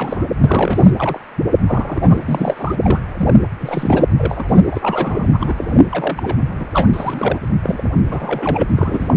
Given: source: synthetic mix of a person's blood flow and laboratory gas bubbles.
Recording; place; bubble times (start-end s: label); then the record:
Doppler ultrasound of blood flow; precordium
0.00-0.27 s: bubbles
0.40-0.91 s: bubbles
0.96-1.20 s: bubbles
1.67-2.75 s: bubbles
2.82-3.01 s: bubbles
3.17-3.34 s: bubbles
3.59-4.05 s: bubbles
4.17-4.62 s: bubbles
4.71-5.28 s: bubbles
5.33-5.80 s: bubbles
5.92-6.37 s: bubbles
6.47-6.67 s: bubbles
6.72-6.88 s: bubbles
6.93-7.39 s: bubbles
7.62-7.91 s: bubbles
8.08-8.68 s: bubbles
8.76-9.14 s: bubbles
From the record:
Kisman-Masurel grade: 242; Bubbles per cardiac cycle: several, 3 to 8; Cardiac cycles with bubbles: 100%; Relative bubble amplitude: moderate (0.250 to 0.450); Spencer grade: 3 (all of the cardiac periods contain showers or single bubble signals, but not dominating or overriding the cardiac motion signals); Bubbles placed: anywhere in the cardiac cycle